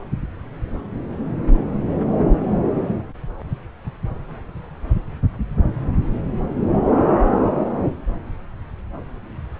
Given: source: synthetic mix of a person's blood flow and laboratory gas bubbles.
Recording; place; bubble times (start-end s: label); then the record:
Doppler ultrasound of blood flow; subclavian vein
no bubbles
From the record:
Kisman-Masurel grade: 000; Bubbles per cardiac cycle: 0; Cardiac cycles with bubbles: 0%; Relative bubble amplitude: no bubbles discernible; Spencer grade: 0 (complete lack of bubble signals)